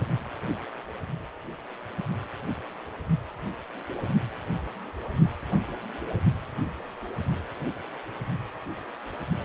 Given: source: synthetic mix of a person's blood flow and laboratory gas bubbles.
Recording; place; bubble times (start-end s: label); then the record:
Doppler ultrasound of blood flow; precordium
no bubbles
From the record:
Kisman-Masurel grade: 000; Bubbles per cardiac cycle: 0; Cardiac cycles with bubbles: 0%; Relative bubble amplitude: no bubbles discernible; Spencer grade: 0 (complete lack of bubble signals)